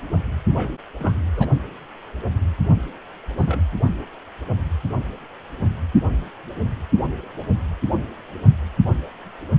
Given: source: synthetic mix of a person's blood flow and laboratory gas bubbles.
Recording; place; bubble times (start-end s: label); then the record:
Doppler ultrasound of blood flow; precordium
0.52-0.71 s: bubbles
0.99-1.13 s: bubbles
1.36-1.48 s: bubbles
3.38-3.63 s: bubbles
From the record:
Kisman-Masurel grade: 221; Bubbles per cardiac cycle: several, 3 to 8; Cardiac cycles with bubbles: 10 to 50%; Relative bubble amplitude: barely perceptible (0.100 to 0.250); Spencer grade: 2 (many but less than half of the cardiac periods contain bubble signals, singularly or in groups); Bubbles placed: only in the low amplitude regions of the cardiac cycle